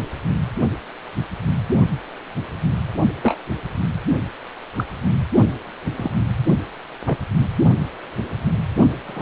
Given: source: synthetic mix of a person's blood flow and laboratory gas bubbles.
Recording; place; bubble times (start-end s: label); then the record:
Doppler ultrasound of blood flow; precordium
3.22-3.35 s: bubbles
4.76-4.84 s: bubbles
5.97-6.10 s: bubbles
7.05-7.25 s: bubbles
9.08-9.22 s: bubbles
From the record:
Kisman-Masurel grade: 122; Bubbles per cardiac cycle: 1 to 2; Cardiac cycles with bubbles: 10 to 50%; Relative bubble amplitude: moderate (0.250 to 0.450); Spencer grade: 2 (many but less than half of the cardiac periods contain bubble signals, singularly or in groups); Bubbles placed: only in the low amplitude regions of the cardiac cycle